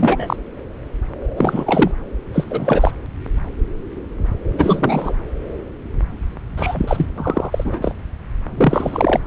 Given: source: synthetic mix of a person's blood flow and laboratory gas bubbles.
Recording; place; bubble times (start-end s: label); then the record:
Doppler ultrasound of blood flow; subclavian vein
0.00-0.36 s: bubbles
1.36-1.92 s: bubbles
2.33-2.92 s: bubbles
4.53-5.14 s: bubbles
6.56-7.06 s: bubbles
7.17-7.95 s: bubbles
8.57-9.21 s: bubbles
From the record:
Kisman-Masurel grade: 333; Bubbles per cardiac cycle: rolling drumbeat, 9 or more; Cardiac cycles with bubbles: 50 to 99%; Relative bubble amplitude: loud (0.450 to 0.775); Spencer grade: 3 (all of the cardiac periods contain showers or single bubble signals, but not dominating or overriding the cardiac motion signals); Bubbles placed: anywhere in the cardiac cycle